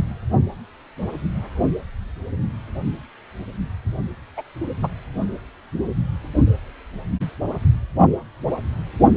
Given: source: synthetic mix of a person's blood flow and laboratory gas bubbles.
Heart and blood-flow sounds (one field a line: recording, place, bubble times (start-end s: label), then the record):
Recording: Doppler ultrasound of blood flow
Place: precordium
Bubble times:
4.36-4.42 s: bubbles
4.82-4.88 s: bubbles
From the record:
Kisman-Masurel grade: 113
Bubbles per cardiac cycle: 1 to 2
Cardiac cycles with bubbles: 1 to 10%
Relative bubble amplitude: loud (0.450 to 0.775)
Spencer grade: 1 (occasional bubble signal discernible with the cardiac motion signal, with majority of cardiac periods free of bubbles)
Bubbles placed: only in the low amplitude regions of the cardiac cycle